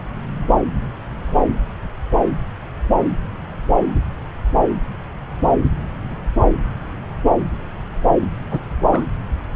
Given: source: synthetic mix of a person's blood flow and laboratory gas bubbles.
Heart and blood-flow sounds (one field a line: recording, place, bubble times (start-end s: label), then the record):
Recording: Doppler ultrasound of blood flow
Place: subclavian vein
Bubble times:
8.51-8.60 s: bubbles
8.91-9.10 s: bubbles
From the record:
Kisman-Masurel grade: 112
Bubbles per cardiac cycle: 1 to 2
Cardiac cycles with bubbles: 1 to 10%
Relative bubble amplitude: moderate (0.250 to 0.450)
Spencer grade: 1 (occasional bubble signal discernible with the cardiac motion signal, with majority of cardiac periods free of bubbles)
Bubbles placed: anywhere in the cardiac cycle